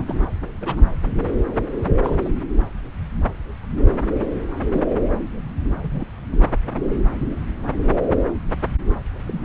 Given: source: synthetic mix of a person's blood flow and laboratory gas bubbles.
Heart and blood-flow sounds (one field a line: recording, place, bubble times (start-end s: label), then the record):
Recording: Doppler ultrasound of blood flow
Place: subclavian vein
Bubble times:
0.00-0.15 s: bubbles
0.61-0.81 s: bubbles
2.03-2.29 s: bubbles
4.72-4.80 s: bubbles
5.83-6.04 s: bubbles
9.27-9.41 s: bubbles
From the record:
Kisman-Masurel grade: 121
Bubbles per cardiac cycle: 1 to 2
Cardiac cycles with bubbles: 10 to 50%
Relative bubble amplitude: barely perceptible (0.100 to 0.250)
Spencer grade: 2 (many but less than half of the cardiac periods contain bubble signals, singularly or in groups)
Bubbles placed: anywhere in the cardiac cycle